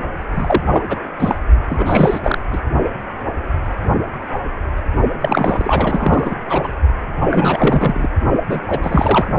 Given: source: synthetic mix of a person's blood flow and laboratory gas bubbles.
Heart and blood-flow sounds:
Doppler ultrasound of blood flow; precordium
0.34-0.97 s: bubbles
1.20-1.35 s: bubbles
1.67-2.20 s: bubbles
2.23-2.38 s: bubbles
2.52-2.59 s: bubbles
5.21-6.36 s: bubbles
6.45-6.71 s: bubbles
7.21-7.27 s: bubbles
7.31-8.09 s: bubbles
8.49-8.60 s: bubbles
8.69-8.79 s: bubbles
8.82-9.26 s: bubbles
From the record:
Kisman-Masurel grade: 333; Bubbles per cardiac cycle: rolling drumbeat, 9 or more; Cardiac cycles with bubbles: 50 to 99%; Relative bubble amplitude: loud (0.450 to 0.775); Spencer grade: 3 (all of the cardiac periods contain showers or single bubble signals, but not dominating or overriding the cardiac motion signals); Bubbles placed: only in the low amplitude regions of the cardiac cycle

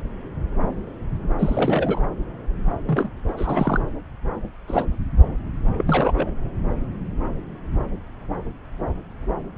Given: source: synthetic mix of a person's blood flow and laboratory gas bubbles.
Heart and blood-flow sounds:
Doppler ultrasound of blood flow; subclavian vein
1.39-2.04 s: bubbles
2.87-3.09 s: bubbles
3.28-3.32 s: bubbles
3.37-3.80 s: bubbles
4.67-4.84 s: bubbles
5.78-5.82 s: bubbles
5.86-6.31 s: bubbles
From the record:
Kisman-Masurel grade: 222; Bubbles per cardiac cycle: several, 3 to 8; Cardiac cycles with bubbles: 10 to 50%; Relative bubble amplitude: moderate (0.250 to 0.450); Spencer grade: 2 (many but less than half of the cardiac periods contain bubble signals, singularly or in groups); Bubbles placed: anywhere in the cardiac cycle

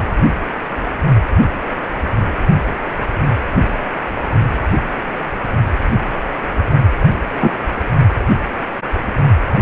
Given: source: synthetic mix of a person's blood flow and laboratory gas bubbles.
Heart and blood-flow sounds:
Doppler ultrasound of blood flow; precordium
7.41-7.51 s: bubbles
From the record:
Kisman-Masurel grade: 123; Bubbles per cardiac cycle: 1 to 2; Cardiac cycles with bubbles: 10 to 50%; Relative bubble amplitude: loud (0.450 to 0.775); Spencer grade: 2 (many but less than half of the cardiac periods contain bubble signals, singularly or in groups); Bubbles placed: only in the low amplitude regions of the cardiac cycle

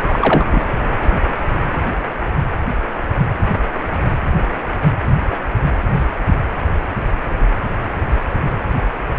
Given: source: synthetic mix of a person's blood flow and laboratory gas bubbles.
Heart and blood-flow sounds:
Doppler ultrasound of blood flow; precordium
0.08-0.61 s: bubbles
From the record:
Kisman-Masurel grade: 213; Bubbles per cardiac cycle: several, 3 to 8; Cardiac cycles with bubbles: 1 to 10%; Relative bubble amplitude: loud (0.450 to 0.775); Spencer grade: 1 (occasional bubble signal discernible with the cardiac motion signal, with majority of cardiac periods free of bubbles); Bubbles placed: anywhere in the cardiac cycle

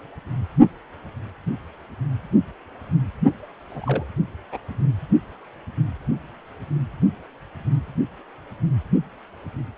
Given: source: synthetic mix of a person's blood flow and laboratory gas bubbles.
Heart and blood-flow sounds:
Doppler ultrasound of blood flow; precordium
3.70-4.05 s: bubbles
4.52-4.58 s: bubbles
From the record:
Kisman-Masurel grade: 121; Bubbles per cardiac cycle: 1 to 2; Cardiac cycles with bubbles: 10 to 50%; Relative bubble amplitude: barely perceptible (0.100 to 0.250); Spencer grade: 2 (many but less than half of the cardiac periods contain bubble signals, singularly or in groups); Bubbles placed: only in the low amplitude regions of the cardiac cycle

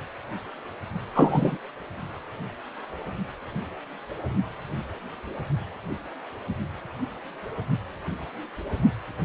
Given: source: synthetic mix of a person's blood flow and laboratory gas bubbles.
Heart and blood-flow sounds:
Doppler ultrasound of blood flow; precordium
1.13-1.57 s: bubbles
From the record:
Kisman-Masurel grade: 113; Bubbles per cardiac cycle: 1 to 2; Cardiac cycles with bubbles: 1 to 10%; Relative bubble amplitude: loud (0.450 to 0.775); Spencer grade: 1 (occasional bubble signal discernible with the cardiac motion signal, with majority of cardiac periods free of bubbles); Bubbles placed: only in the low amplitude regions of the cardiac cycle

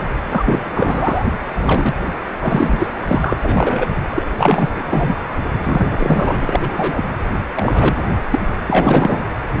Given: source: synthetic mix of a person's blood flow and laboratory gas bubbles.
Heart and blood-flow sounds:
Doppler ultrasound of blood flow; precordium
0.00-0.06 s: bubbles
0.28-1.23 s: bubbles
1.61-1.95 s: bubbles
2.41-2.88 s: bubbles
3.06-3.37 s: bubbles
3.41-3.88 s: bubbles
4.11-4.26 s: bubbles
4.38-4.83 s: bubbles
4.90-5.15 s: bubbles
5.63-5.86 s: bubbles
5.88-7.03 s: bubbles
7.55-8.03 s: bubbles
8.30-8.39 s: bubbles
8.67-9.25 s: bubbles
From the record:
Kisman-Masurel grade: 343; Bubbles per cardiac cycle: rolling drumbeat, 9 or more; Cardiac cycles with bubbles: 100%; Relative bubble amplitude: loud (0.450 to 0.775); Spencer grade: 3 (all of the cardiac periods contain showers or single bubble signals, but not dominating or overriding the cardiac motion signals); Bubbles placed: anywhere in the cardiac cycle

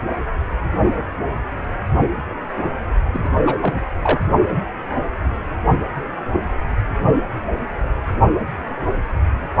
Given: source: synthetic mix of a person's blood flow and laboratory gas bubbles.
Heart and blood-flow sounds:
Doppler ultrasound of blood flow; precordium
3.13-3.20 s: bubbles
3.23-3.29 s: bubbles
3.45-3.58 s: bubbles
3.61-3.74 s: bubbles
4.02-4.19 s: bubbles
From the record:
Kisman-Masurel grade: 212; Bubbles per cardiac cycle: several, 3 to 8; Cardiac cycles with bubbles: 1 to 10%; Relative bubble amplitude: moderate (0.250 to 0.450); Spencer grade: 1 (occasional bubble signal discernible with the cardiac motion signal, with majority of cardiac periods free of bubbles); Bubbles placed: only in the low amplitude regions of the cardiac cycle

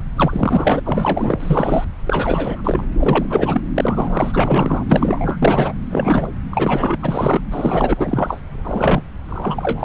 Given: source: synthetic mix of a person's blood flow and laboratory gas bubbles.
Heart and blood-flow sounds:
Doppler ultrasound of blood flow; subclavian vein
0.16-0.80 s: bubbles
0.84-1.36 s: bubbles
1.40-1.85 s: bubbles
2.06-2.84 s: bubbles
2.99-3.25 s: bubbles
3.29-3.61 s: bubbles
3.76-4.83 s: bubbles
4.88-5.38 s: bubbles
5.42-5.72 s: bubbles
5.90-6.28 s: bubbles
6.51-6.96 s: bubbles
7.02-7.41 s: bubbles
7.50-8.41 s: bubbles
8.54-9.02 s: bubbles
9.28-9.84 s: bubbles
From the record:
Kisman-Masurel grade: 343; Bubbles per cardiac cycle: rolling drumbeat, 9 or more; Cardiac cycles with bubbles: 100%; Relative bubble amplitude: loud (0.450 to 0.775); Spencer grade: 3 (all of the cardiac periods contain showers or single bubble signals, but not dominating or overriding the cardiac motion signals); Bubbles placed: anywhere in the cardiac cycle

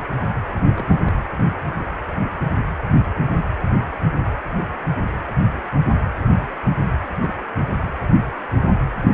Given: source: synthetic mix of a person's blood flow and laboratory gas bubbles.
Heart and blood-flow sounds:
Doppler ultrasound of blood flow; precordium
0.75-1.20 s: bubbles
1.78-1.82 s: bubbles
7.20-7.33 s: bubbles
From the record:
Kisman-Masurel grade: 121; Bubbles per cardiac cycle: 1 to 2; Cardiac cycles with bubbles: 10 to 50%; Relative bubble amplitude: barely perceptible (0.100 to 0.250); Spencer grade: 2 (many but less than half of the cardiac periods contain bubble signals, singularly or in groups); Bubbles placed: anywhere in the cardiac cycle

